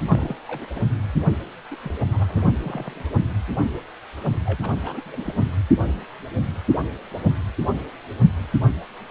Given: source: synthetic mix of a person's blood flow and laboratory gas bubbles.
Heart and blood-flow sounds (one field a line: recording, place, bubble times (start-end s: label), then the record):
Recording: Doppler ultrasound of blood flow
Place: precordium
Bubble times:
0.08-0.36 s: bubbles
0.47-0.71 s: bubbles
0.74-0.81 s: bubbles
1.71-1.76 s: bubbles
1.80-1.95 s: bubbles
2.11-2.48 s: bubbles
2.63-3.03 s: bubbles
4.45-4.73 s: bubbles
4.83-5.01 s: bubbles
5.05-5.34 s: bubbles
From the record:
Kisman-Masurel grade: 221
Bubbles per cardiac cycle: several, 3 to 8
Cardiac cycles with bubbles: 10 to 50%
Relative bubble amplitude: barely perceptible (0.100 to 0.250)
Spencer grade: 2 (many but less than half of the cardiac periods contain bubble signals, singularly or in groups)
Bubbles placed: only in the low amplitude regions of the cardiac cycle